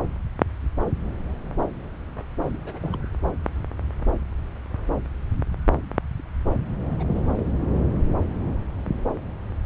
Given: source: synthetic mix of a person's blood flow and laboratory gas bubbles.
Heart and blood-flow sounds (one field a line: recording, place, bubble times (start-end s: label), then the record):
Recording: Doppler ultrasound of blood flow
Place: subclavian vein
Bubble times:
2.42-2.58 s: bubbles
2.63-3.06 s: bubbles
6.91-7.45 s: bubbles
7.74-7.87 s: bubbles
From the record:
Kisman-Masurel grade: 221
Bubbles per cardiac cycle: several, 3 to 8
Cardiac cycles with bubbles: 10 to 50%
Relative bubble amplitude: barely perceptible (0.100 to 0.250)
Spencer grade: 2 (many but less than half of the cardiac periods contain bubble signals, singularly or in groups)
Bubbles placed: anywhere in the cardiac cycle